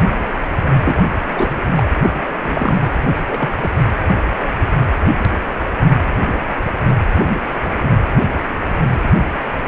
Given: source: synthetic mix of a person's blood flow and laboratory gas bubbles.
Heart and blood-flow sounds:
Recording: Doppler ultrasound of blood flow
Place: precordium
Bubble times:
0.83-1.08 s: bubbles
1.36-1.59 s: bubbles
1.69-1.86 s: bubbles
1.98-2.20 s: bubbles
2.42-2.79 s: bubbles
3.27-3.49 s: bubbles
3.61-3.70 s: bubbles
From the record:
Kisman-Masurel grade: 222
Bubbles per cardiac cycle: several, 3 to 8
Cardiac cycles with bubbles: 10 to 50%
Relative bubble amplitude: moderate (0.250 to 0.450)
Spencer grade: 2 (many but less than half of the cardiac periods contain bubble signals, singularly or in groups)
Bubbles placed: anywhere in the cardiac cycle

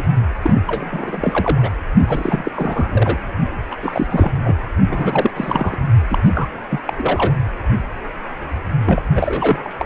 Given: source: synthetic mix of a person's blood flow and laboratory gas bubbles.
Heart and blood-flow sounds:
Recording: Doppler ultrasound of blood flow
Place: precordium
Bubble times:
0.00-0.10 s: bubbles
0.42-0.61 s: bubbles
0.67-1.73 s: bubbles
2.08-2.52 s: bubbles
2.56-3.18 s: bubbles
3.71-3.76 s: bubbles
3.83-4.07 s: bubbles
4.10-4.32 s: bubbles
4.45-4.57 s: bubbles
4.88-5.31 s: bubbles
5.36-5.79 s: bubbles
6.10-6.19 s: bubbles
6.33-6.49 s: bubbles
6.70-6.80 s: bubbles
6.87-6.94 s: bubbles
6.96-7.32 s: bubbles
8.86-9.02 s: bubbles
9.14-9.85 s: bubbles
From the record:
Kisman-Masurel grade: 332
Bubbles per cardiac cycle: rolling drumbeat, 9 or more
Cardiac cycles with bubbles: 50 to 99%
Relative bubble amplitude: moderate (0.250 to 0.450)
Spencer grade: 3 (all of the cardiac periods contain showers or single bubble signals, but not dominating or overriding the cardiac motion signals)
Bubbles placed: anywhere in the cardiac cycle

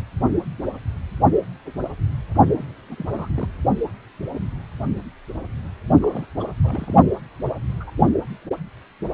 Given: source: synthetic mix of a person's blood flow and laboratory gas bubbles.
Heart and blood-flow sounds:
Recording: Doppler ultrasound of blood flow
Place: precordium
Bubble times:
2.57-2.63 s: bubbles
2.88-3.27 s: bubbles
3.34-3.47 s: bubbles
6.01-6.26 s: bubbles
6.40-6.46 s: bubbles
6.63-6.94 s: bubbles
7.67-7.73 s: bubbles
7.80-7.84 s: bubbles
7.86-7.91 s: bubbles
From the record:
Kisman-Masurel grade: 221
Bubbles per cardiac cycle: several, 3 to 8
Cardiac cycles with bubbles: 10 to 50%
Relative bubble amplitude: barely perceptible (0.100 to 0.250)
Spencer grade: 2 (many but less than half of the cardiac periods contain bubble signals, singularly or in groups)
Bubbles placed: only in the low amplitude regions of the cardiac cycle

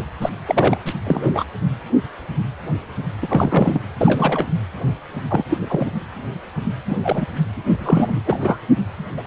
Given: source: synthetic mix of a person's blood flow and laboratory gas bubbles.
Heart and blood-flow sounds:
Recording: Doppler ultrasound of blood flow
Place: precordium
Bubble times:
0.00-0.02 s: bubbles
0.21-0.29 s: bubbles
0.46-0.77 s: bubbles
0.85-0.93 s: bubbles
1.06-1.44 s: bubbles
3.22-3.80 s: bubbles
3.98-4.47 s: bubbles
5.29-5.45 s: bubbles
5.49-5.58 s: bubbles
5.61-5.90 s: bubbles
6.87-6.97 s: bubbles
7.03-7.27 s: bubbles
7.68-8.21 s: bubbles
8.26-8.59 s: bubbles
9.18-9.22 s: bubbles
From the record:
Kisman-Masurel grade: 233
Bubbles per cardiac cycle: several, 3 to 8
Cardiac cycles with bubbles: 50 to 99%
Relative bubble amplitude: loud (0.450 to 0.775)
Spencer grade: 3 (all of the cardiac periods contain showers or single bubble signals, but not dominating or overriding the cardiac motion signals)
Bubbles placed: anywhere in the cardiac cycle

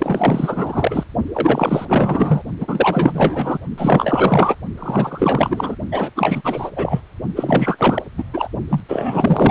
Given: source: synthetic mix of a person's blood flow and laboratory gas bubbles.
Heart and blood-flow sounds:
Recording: Doppler ultrasound of blood flow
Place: precordium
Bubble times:
0.00-1.04 s: bubbles
1.34-2.43 s: bubbles
2.60-3.58 s: bubbles
3.77-4.55 s: bubbles
4.77-5.76 s: bubbles
5.92-6.10 s: bubbles
6.15-6.70 s: bubbles
6.76-7.01 s: bubbles
7.35-8.05 s: bubbles
8.17-8.24 s: bubbles
8.33-8.49 s: bubbles
8.70-8.81 s: bubbles
8.88-9.51 s: bubbles
From the record:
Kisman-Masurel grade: 444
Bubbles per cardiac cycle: continuous sound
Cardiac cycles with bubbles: 100%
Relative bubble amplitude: maximal (0.775 to 0.999)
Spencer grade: 4 (maximum detectable bubble signal sounding continuously throughout systole and diastole of every cardiac period, and overriding the amplitude of the normal cardiac signals)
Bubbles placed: only in the low amplitude regions of the cardiac cycle

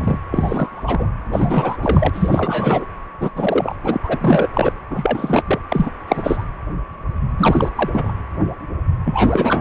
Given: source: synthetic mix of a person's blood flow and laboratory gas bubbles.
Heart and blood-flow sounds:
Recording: Doppler ultrasound of blood flow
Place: precordium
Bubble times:
0.00-0.19 s: bubbles
0.31-1.10 s: bubbles
1.32-1.77 s: bubbles
1.81-2.09 s: bubbles
2.13-2.86 s: bubbles
3.21-3.31 s: bubbles
3.35-3.76 s: bubbles
3.83-3.97 s: bubbles
4.03-4.47 s: bubbles
4.54-4.72 s: bubbles
4.90-5.42 s: bubbles
5.46-5.59 s: bubbles
5.68-5.91 s: bubbles
6.08-6.43 s: bubbles
7.38-7.69 s: bubbles
7.75-8.12 s: bubbles
9.05-9.61 s: bubbles
From the record:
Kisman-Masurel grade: 333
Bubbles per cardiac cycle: rolling drumbeat, 9 or more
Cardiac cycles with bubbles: 50 to 99%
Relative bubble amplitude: loud (0.450 to 0.775)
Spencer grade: 3 (all of the cardiac periods contain showers or single bubble signals, but not dominating or overriding the cardiac motion signals)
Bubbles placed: anywhere in the cardiac cycle

